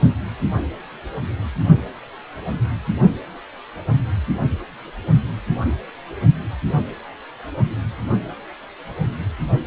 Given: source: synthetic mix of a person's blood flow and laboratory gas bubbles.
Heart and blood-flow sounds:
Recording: Doppler ultrasound of blood flow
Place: precordium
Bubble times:
no bubbles
From the record:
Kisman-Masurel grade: 000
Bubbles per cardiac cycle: 0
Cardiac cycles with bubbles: 0%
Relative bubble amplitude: no bubbles discernible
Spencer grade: 0 (complete lack of bubble signals)

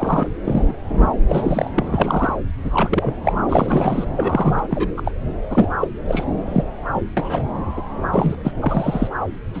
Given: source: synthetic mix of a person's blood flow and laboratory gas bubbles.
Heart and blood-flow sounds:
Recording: Doppler ultrasound of blood flow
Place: subclavian vein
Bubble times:
0.00-0.27 s: bubbles
0.44-0.72 s: bubbles
0.88-1.08 s: bubbles
1.28-1.70 s: bubbles
1.75-2.36 s: bubbles
2.63-3.16 s: bubbles
3.23-3.32 s: bubbles
3.48-4.07 s: bubbles
4.17-4.89 s: bubbles
4.97-5.02 s: bubbles
5.05-5.12 s: bubbles
5.50-5.68 s: bubbles
5.81-5.88 s: bubbles
6.08-6.24 s: bubbles
6.46-6.64 s: bubbles
6.94-7.01 s: bubbles
7.17-7.42 s: bubbles
7.77-7.82 s: bubbles
8.12-8.35 s: bubbles
8.44-8.51 s: bubbles
8.62-9.07 s: bubbles
9.54-9.60 s: bubbles
From the record:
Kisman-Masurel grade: 243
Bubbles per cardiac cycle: several, 3 to 8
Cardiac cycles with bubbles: 100%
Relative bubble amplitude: loud (0.450 to 0.775)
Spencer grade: 3 (all of the cardiac periods contain showers or single bubble signals, but not dominating or overriding the cardiac motion signals)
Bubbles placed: anywhere in the cardiac cycle

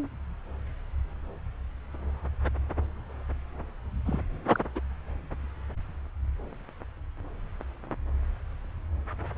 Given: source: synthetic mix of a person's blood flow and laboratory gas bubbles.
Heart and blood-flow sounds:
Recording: Doppler ultrasound of blood flow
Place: subclavian vein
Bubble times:
4.05-4.21 s: bubbles
4.52-4.60 s: bubbles
4.75-4.80 s: bubbles
From the record:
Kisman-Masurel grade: 211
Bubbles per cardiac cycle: several, 3 to 8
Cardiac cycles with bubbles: 1 to 10%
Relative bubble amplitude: barely perceptible (0.100 to 0.250)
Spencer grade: 1 (occasional bubble signal discernible with the cardiac motion signal, with majority of cardiac periods free of bubbles)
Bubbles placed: anywhere in the cardiac cycle

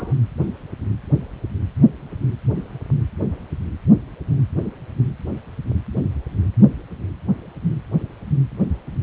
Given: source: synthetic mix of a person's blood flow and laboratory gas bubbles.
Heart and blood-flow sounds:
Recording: Doppler ultrasound of blood flow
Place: precordium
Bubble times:
0.00-0.14 s: bubbles
From the record:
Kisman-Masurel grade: 112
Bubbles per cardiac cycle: 1 to 2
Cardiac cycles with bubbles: 1 to 10%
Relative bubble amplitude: moderate (0.250 to 0.450)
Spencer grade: 1 (occasional bubble signal discernible with the cardiac motion signal, with majority of cardiac periods free of bubbles)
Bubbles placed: anywhere in the cardiac cycle

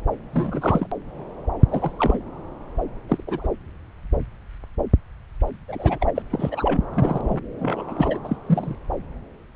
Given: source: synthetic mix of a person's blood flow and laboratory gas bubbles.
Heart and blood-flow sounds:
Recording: Doppler ultrasound of blood flow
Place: subclavian vein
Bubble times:
0.33-0.87 s: bubbles
1.69-1.92 s: bubbles
1.98-2.19 s: bubbles
3.08-3.23 s: bubbles
3.27-3.48 s: bubbles
5.68-6.12 s: bubbles
6.15-6.22 s: bubbles
6.31-6.86 s: bubbles
6.94-7.41 s: bubbles
7.59-8.19 s: bubbles
8.23-8.36 s: bubbles
8.46-8.75 s: bubbles
From the record:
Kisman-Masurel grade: 232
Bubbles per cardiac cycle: several, 3 to 8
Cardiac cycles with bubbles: 50 to 99%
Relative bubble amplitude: moderate (0.250 to 0.450)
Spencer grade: 3 (all of the cardiac periods contain showers or single bubble signals, but not dominating or overriding the cardiac motion signals)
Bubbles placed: anywhere in the cardiac cycle

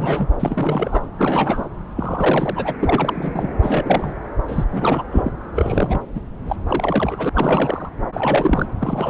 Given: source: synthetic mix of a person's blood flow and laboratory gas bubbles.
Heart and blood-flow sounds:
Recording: Doppler ultrasound of blood flow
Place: subclavian vein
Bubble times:
0.00-0.29 s: bubbles
0.39-1.09 s: bubbles
1.18-1.68 s: bubbles
1.95-2.75 s: bubbles
2.80-3.49 s: bubbles
3.62-4.17 s: bubbles
4.48-4.64 s: bubbles
4.71-5.02 s: bubbles
5.11-5.31 s: bubbles
5.54-5.99 s: bubbles
6.14-6.20 s: bubbles
6.46-6.56 s: bubbles
6.67-7.29 s: bubbles
7.34-7.89 s: bubbles
8.12-8.66 s: bubbles
8.80-9.10 s: bubbles
From the record:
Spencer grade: 3 (all of the cardiac periods contain showers or single bubble signals, but not dominating or overriding the cardiac motion signals)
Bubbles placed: anywhere in the cardiac cycle

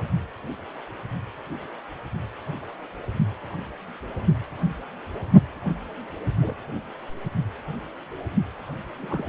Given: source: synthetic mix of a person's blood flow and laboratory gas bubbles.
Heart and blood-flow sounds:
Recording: Doppler ultrasound of blood flow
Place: precordium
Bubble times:
6.41-6.54 s: bubbles
9.02-9.24 s: bubbles
From the record:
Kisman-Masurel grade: 121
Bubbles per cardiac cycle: 1 to 2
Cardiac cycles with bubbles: 10 to 50%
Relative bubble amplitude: barely perceptible (0.100 to 0.250)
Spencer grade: 2 (many but less than half of the cardiac periods contain bubble signals, singularly or in groups)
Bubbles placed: anywhere in the cardiac cycle

